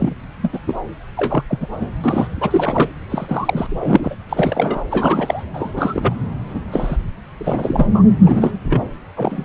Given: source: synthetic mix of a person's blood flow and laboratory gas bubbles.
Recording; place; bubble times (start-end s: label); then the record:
Doppler ultrasound of blood flow; subclavian vein
0.00-0.15 s: bubbles
0.42-0.50 s: bubbles
0.53-0.60 s: bubbles
0.67-0.74 s: bubbles
1.17-1.43 s: bubbles
1.48-1.68 s: bubbles
1.79-1.87 s: bubbles
2.04-2.27 s: bubbles
2.40-2.89 s: bubbles
3.10-4.16 s: bubbles
4.29-4.83 s: bubbles
4.91-5.44 s: bubbles
5.53-5.72 s: bubbles
5.76-6.15 s: bubbles
6.49-6.60 s: bubbles
6.71-6.96 s: bubbles
7.38-7.87 s: bubbles
7.94-8.03 s: bubbles
8.21-8.54 s: bubbles
8.64-8.81 s: bubbles
9.16-9.45 s: bubbles
From the record:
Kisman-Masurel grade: 243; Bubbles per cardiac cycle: several, 3 to 8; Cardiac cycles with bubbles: 100%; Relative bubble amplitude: loud (0.450 to 0.775); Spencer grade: 3 (all of the cardiac periods contain showers or single bubble signals, but not dominating or overriding the cardiac motion signals); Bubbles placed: anywhere in the cardiac cycle